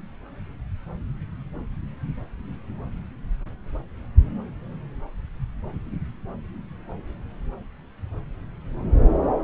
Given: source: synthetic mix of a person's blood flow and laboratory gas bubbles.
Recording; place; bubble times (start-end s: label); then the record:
Doppler ultrasound of blood flow; subclavian vein
no bubbles
From the record:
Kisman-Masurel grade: 000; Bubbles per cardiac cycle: 0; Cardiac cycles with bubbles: 0%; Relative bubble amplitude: no bubbles discernible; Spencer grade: 0 (complete lack of bubble signals)